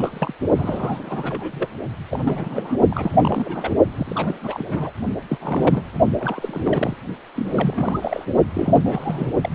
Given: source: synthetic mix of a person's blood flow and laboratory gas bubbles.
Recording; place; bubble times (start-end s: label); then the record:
Doppler ultrasound of blood flow; precordium
0.00-0.34 s: bubbles
0.56-1.67 s: bubbles
2.10-2.75 s: bubbles
2.89-3.75 s: bubbles
3.96-4.67 s: bubbles
4.70-4.91 s: bubbles
5.29-5.82 s: bubbles
6.19-6.96 s: bubbles
7.36-8.25 s: bubbles
8.54-8.80 s: bubbles
8.83-9.31 s: bubbles
9.41-9.49 s: bubbles
From the record:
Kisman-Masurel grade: 342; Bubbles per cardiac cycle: rolling drumbeat, 9 or more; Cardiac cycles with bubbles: 100%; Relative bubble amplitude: moderate (0.250 to 0.450); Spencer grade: 3 (all of the cardiac periods contain showers or single bubble signals, but not dominating or overriding the cardiac motion signals); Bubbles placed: only in the low amplitude regions of the cardiac cycle